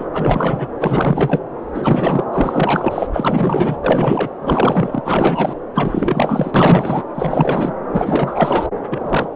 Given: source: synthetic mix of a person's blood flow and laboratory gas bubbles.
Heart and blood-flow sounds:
Doppler ultrasound of blood flow; subclavian vein
0.00-0.05 s: bubbles
0.14-0.69 s: bubbles
0.79-1.41 s: bubbles
1.74-2.25 s: bubbles
2.33-3.07 s: bubbles
3.12-3.77 s: bubbles
3.84-4.36 s: bubbles
4.42-5.01 s: bubbles
5.05-5.54 s: bubbles
5.75-6.51 s: bubbles
6.54-7.02 s: bubbles
7.14-7.73 s: bubbles
7.88-8.66 s: bubbles
8.90-9.28 s: bubbles
From the record:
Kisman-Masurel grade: 444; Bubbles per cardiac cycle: continuous sound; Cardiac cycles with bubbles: 100%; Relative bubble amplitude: maximal (0.775 to 0.999); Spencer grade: 4 (maximum detectable bubble signal sounding continuously throughout systole and diastole of every cardiac period, and overriding the amplitude of the normal cardiac signals); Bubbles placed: anywhere in the cardiac cycle

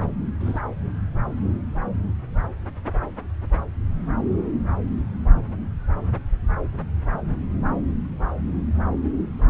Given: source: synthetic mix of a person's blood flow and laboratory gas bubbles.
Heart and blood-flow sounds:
Doppler ultrasound of blood flow; subclavian vein
0.40-0.59 s: bubbles
From the record:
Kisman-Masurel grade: 121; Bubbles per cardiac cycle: 1 to 2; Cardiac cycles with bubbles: 10 to 50%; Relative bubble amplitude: barely perceptible (0.100 to 0.250); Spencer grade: 2 (many but less than half of the cardiac periods contain bubble signals, singularly or in groups); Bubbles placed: anywhere in the cardiac cycle

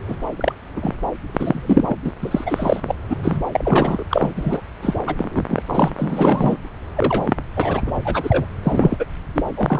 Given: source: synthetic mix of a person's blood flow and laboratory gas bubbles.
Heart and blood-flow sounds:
Doppler ultrasound of blood flow; subclavian vein
0.08-0.17 s: bubbles
0.36-0.53 s: bubbles
0.76-0.95 s: bubbles
1.27-1.95 s: bubbles
2.04-2.12 s: bubbles
2.22-2.80 s: bubbles
2.83-2.95 s: bubbles
3.10-3.16 s: bubbles
3.23-3.39 s: bubbles
3.52-4.04 s: bubbles
4.11-4.32 s: bubbles
4.36-4.62 s: bubbles
4.82-4.95 s: bubbles
5.07-5.44 s: bubbles
5.49-5.62 s: bubbles
5.66-5.91 s: bubbles
5.97-6.56 s: bubbles
6.96-7.34 s: bubbles
7.56-7.82 s: bubbles
7.84-7.92 s: bubbles
8.04-8.46 s: bubbles
8.63-9.05 s: bubbles
9.35-9.43 s: bubbles
9.56-9.80 s: bubbles
From the record:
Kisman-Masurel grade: 243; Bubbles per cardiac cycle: several, 3 to 8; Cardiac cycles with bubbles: 100%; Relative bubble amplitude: loud (0.450 to 0.775); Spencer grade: 3 (all of the cardiac periods contain showers or single bubble signals, but not dominating or overriding the cardiac motion signals); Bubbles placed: anywhere in the cardiac cycle

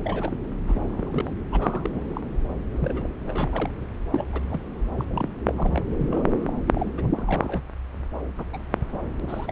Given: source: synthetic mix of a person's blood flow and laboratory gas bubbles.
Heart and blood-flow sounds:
Doppler ultrasound of blood flow; subclavian vein
0.04-0.37 s: bubbles
0.67-1.31 s: bubbles
1.51-2.21 s: bubbles
2.71-3.10 s: bubbles
3.26-3.71 s: bubbles
3.81-3.85 s: bubbles
4.11-4.25 s: bubbles
4.32-4.61 s: bubbles
4.95-5.29 s: bubbles
5.46-5.84 s: bubbles
5.97-6.53 s: bubbles
6.66-6.93 s: bubbles
6.97-7.08 s: bubbles
7.15-7.69 s: bubbles
8.38-8.46 s: bubbles
8.53-8.58 s: bubbles
8.91-8.98 s: bubbles
9.21-9.52 s: bubbles
From the record:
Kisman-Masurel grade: 242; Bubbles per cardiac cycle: several, 3 to 8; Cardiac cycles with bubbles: 100%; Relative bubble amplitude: moderate (0.250 to 0.450); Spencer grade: 3 (all of the cardiac periods contain showers or single bubble signals, but not dominating or overriding the cardiac motion signals); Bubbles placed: anywhere in the cardiac cycle

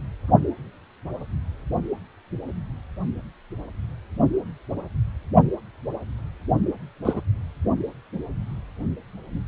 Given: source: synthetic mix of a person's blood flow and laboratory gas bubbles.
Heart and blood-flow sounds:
Doppler ultrasound of blood flow; precordium
7.05-7.21 s: bubbles
From the record:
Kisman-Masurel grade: 122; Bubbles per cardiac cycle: 1 to 2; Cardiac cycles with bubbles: 10 to 50%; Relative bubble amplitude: moderate (0.250 to 0.450); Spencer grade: 2 (many but less than half of the cardiac periods contain bubble signals, singularly or in groups); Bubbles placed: only in the low amplitude regions of the cardiac cycle

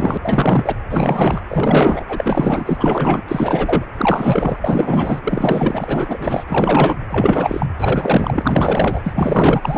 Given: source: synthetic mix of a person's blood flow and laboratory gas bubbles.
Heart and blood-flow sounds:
Doppler ultrasound of blood flow; precordium
0.00-0.17 s: bubbles
0.22-0.75 s: bubbles
0.89-1.41 s: bubbles
1.49-2.05 s: bubbles
2.09-3.21 s: bubbles
3.27-3.84 s: bubbles
3.97-4.57 s: bubbles
4.62-5.21 s: bubbles
5.24-6.43 s: bubbles
6.49-6.97 s: bubbles
7.09-7.66 s: bubbles
7.78-9.00 s: bubbles
9.04-9.78 s: bubbles
From the record:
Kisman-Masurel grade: 444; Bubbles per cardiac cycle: continuous sound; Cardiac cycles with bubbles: 100%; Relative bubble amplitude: maximal (0.775 to 0.999); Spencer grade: 4 (maximum detectable bubble signal sounding continuously throughout systole and diastole of every cardiac period, and overriding the amplitude of the normal cardiac signals); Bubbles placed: anywhere in the cardiac cycle

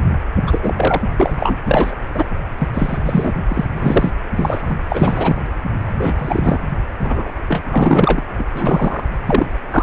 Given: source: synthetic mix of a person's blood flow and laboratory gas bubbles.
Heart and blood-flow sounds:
Doppler ultrasound of blood flow; precordium
0.47-0.59 s: bubbles
0.62-1.02 s: bubbles
1.19-1.56 s: bubbles
1.66-1.96 s: bubbles
2.15-2.25 s: bubbles
2.60-2.67 s: bubbles
2.74-2.98 s: bubbles
3.05-3.33 s: bubbles
3.48-3.66 s: bubbles
3.77-4.11 s: bubbles
4.36-4.75 s: bubbles
4.89-5.41 s: bubbles
5.83-6.62 s: bubbles
7.02-7.31 s: bubbles
7.48-7.62 s: bubbles
7.69-8.21 s: bubbles
8.38-8.44 s: bubbles
8.52-9.04 s: bubbles
9.25-9.46 s: bubbles
9.71-9.83 s: bubbles
From the record:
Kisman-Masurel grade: 243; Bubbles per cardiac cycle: several, 3 to 8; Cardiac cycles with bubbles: 100%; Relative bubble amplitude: loud (0.450 to 0.775); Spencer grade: 3 (all of the cardiac periods contain showers or single bubble signals, but not dominating or overriding the cardiac motion signals); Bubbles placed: anywhere in the cardiac cycle

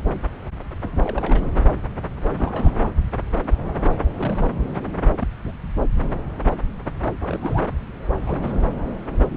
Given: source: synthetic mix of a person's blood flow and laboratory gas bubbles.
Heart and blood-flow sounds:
Doppler ultrasound of blood flow; subclavian vein
0.82-1.46 s: bubbles
2.29-2.91 s: bubbles
4.17-4.50 s: bubbles
5.20-5.27 s: bubbles
5.44-5.52 s: bubbles
7.20-7.61 s: bubbles
8.27-8.73 s: bubbles
9.30-9.37 s: bubbles
From the record:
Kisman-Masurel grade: 221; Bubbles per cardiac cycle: several, 3 to 8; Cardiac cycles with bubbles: 10 to 50%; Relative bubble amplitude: barely perceptible (0.100 to 0.250); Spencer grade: 2 (many but less than half of the cardiac periods contain bubble signals, singularly or in groups); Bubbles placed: anywhere in the cardiac cycle

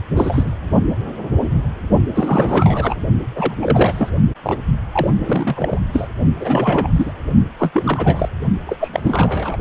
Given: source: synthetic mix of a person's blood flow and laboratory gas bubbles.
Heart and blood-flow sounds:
Doppler ultrasound of blood flow; precordium
0.16-0.52 s: bubbles
2.14-2.96 s: bubbles
3.35-3.54 s: bubbles
3.61-4.10 s: bubbles
4.43-4.57 s: bubbles
4.92-5.09 s: bubbles
5.18-5.79 s: bubbles
5.92-6.08 s: bubbles
6.40-6.89 s: bubbles
6.96-7.12 s: bubbles
7.58-7.71 s: bubbles
7.74-8.29 s: bubbles
8.66-8.76 s: bubbles
8.79-9.57 s: bubbles
From the record:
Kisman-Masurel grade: 332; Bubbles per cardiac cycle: rolling drumbeat, 9 or more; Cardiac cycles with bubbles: 50 to 99%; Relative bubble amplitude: moderate (0.250 to 0.450); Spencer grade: 3 (all of the cardiac periods contain showers or single bubble signals, but not dominating or overriding the cardiac motion signals); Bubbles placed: only in the low amplitude regions of the cardiac cycle

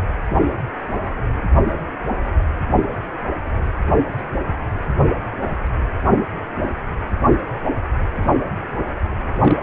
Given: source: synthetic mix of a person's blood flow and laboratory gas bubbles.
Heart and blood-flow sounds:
Doppler ultrasound of blood flow; precordium
9.42-9.57 s: bubbles
From the record:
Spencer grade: 2 (many but less than half of the cardiac periods contain bubble signals, singularly or in groups); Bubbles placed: anywhere in the cardiac cycle

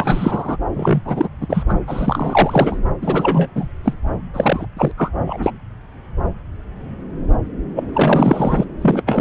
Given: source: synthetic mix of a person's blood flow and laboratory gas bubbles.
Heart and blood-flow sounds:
Doppler ultrasound of blood flow; subclavian vein
0.00-0.56 s: bubbles
0.74-1.01 s: bubbles
1.05-1.28 s: bubbles
1.41-1.64 s: bubbles
1.69-1.74 s: bubbles
1.87-2.77 s: bubbles
3.02-3.48 s: bubbles
3.55-3.67 s: bubbles
3.84-3.93 s: bubbles
4.33-4.66 s: bubbles
4.76-4.92 s: bubbles
4.97-5.12 s: bubbles
5.26-5.52 s: bubbles
7.75-8.65 s: bubbles
8.81-9.02 s: bubbles
9.06-9.21 s: bubbles
From the record:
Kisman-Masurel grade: 333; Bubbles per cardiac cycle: rolling drumbeat, 9 or more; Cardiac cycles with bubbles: 50 to 99%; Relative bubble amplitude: loud (0.450 to 0.775); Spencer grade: 3 (all of the cardiac periods contain showers or single bubble signals, but not dominating or overriding the cardiac motion signals); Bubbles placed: anywhere in the cardiac cycle

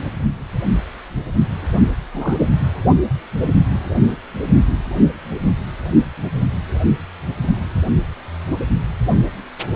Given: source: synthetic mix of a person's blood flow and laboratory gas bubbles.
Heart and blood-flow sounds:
Doppler ultrasound of blood flow; precordium
2.11-2.50 s: bubbles
From the record:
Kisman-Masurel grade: 112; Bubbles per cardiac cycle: 1 to 2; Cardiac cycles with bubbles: 1 to 10%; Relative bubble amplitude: moderate (0.250 to 0.450); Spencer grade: 1 (occasional bubble signal discernible with the cardiac motion signal, with majority of cardiac periods free of bubbles); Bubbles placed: only in the low amplitude regions of the cardiac cycle

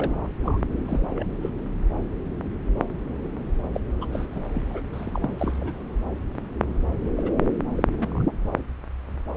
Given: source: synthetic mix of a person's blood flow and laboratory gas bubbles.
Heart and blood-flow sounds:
Doppler ultrasound of blood flow; subclavian vein
0.00-0.28 s: bubbles
0.43-0.58 s: bubbles
0.86-1.26 s: bubbles
1.42-1.50 s: bubbles
3.73-3.81 s: bubbles
4.01-4.07 s: bubbles
4.12-4.27 s: bubbles
4.31-4.42 s: bubbles
4.54-4.81 s: bubbles
4.93-5.85 s: bubbles
7.17-7.33 s: bubbles
7.75-7.83 s: bubbles
7.99-8.25 s: bubbles
From the record:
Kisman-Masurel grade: 232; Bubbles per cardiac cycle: several, 3 to 8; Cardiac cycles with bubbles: 50 to 99%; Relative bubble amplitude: moderate (0.250 to 0.450); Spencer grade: 3 (all of the cardiac periods contain showers or single bubble signals, but not dominating or overriding the cardiac motion signals); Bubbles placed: anywhere in the cardiac cycle

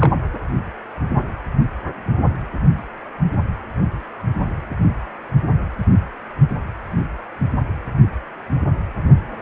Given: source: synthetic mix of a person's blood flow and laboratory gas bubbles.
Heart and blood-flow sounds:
Doppler ultrasound of blood flow; precordium
0.00-0.12 s: bubbles
From the record:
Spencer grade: 1 (occasional bubble signal discernible with the cardiac motion signal, with majority of cardiac periods free of bubbles); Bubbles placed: anywhere in the cardiac cycle

